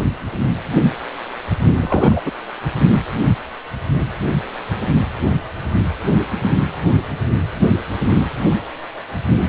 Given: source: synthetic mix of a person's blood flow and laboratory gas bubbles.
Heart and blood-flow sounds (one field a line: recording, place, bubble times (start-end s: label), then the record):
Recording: Doppler ultrasound of blood flow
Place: precordium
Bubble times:
1.76-2.22 s: bubbles
2.25-2.31 s: bubbles
From the record:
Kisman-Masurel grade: 222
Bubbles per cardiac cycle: several, 3 to 8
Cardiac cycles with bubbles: 10 to 50%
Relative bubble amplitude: moderate (0.250 to 0.450)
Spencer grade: 2 (many but less than half of the cardiac periods contain bubble signals, singularly or in groups)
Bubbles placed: only in the low amplitude regions of the cardiac cycle